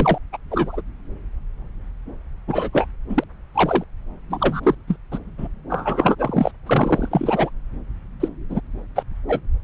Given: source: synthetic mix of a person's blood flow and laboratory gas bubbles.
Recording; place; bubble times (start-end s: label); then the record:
Doppler ultrasound of blood flow; subclavian vein
0.00-0.18 s: bubbles
0.32-0.37 s: bubbles
0.50-0.81 s: bubbles
2.48-2.69 s: bubbles
2.73-2.87 s: bubbles
3.09-3.24 s: bubbles
3.54-3.84 s: bubbles
4.29-4.61 s: bubbles
4.63-4.75 s: bubbles
4.87-4.96 s: bubbles
5.12-5.18 s: bubbles
5.38-5.47 s: bubbles
5.70-6.16 s: bubbles
6.19-6.51 s: bubbles
6.66-7.50 s: bubbles
8.20-8.29 s: bubbles
8.49-8.61 s: bubbles
8.96-9.03 s: bubbles
9.28-9.40 s: bubbles
From the record:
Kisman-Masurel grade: 243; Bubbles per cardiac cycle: several, 3 to 8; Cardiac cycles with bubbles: 100%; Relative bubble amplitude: loud (0.450 to 0.775); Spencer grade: 3 (all of the cardiac periods contain showers or single bubble signals, but not dominating or overriding the cardiac motion signals); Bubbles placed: anywhere in the cardiac cycle